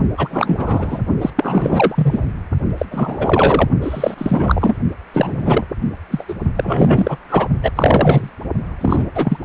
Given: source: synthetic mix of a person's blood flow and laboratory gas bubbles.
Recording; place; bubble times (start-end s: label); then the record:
Doppler ultrasound of blood flow; precordium
0.17-1.01 s: bubbles
1.21-1.30 s: bubbles
1.36-2.26 s: bubbles
2.78-2.85 s: bubbles
2.91-3.68 s: bubbles
3.82-4.15 s: bubbles
4.17-4.76 s: bubbles
5.13-5.65 s: bubbles
6.11-6.25 s: bubbles
6.28-6.34 s: bubbles
6.55-7.17 s: bubbles
7.29-7.47 s: bubbles
7.62-7.72 s: bubbles
7.75-8.29 s: bubbles
8.81-9.04 s: bubbles
9.14-9.37 s: bubbles
From the record:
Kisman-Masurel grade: 333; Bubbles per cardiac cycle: rolling drumbeat, 9 or more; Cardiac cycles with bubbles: 50 to 99%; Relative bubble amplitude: loud (0.450 to 0.775); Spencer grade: 3 (all of the cardiac periods contain showers or single bubble signals, but not dominating or overriding the cardiac motion signals); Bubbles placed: only in the low amplitude regions of the cardiac cycle